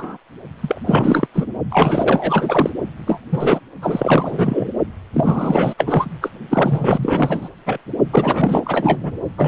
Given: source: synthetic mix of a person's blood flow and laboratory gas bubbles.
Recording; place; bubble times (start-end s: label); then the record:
Doppler ultrasound of blood flow; precordium
0.00-0.17 s: bubbles
0.61-0.80 s: bubbles
0.86-1.27 s: bubbles
1.34-1.47 s: bubbles
1.70-2.70 s: bubbles
3.06-3.21 s: bubbles
3.31-3.60 s: bubbles
3.81-4.70 s: bubbles
5.13-5.74 s: bubbles
5.78-6.12 s: bubbles
6.21-6.29 s: bubbles
6.50-7.49 s: bubbles
7.66-7.79 s: bubbles
8.12-9.12 s: bubbles
9.37-9.48 s: bubbles
From the record:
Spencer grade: 4 (maximum detectable bubble signal sounding continuously throughout systole and diastole of every cardiac period, and overriding the amplitude of the normal cardiac signals); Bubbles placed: only in the low amplitude regions of the cardiac cycle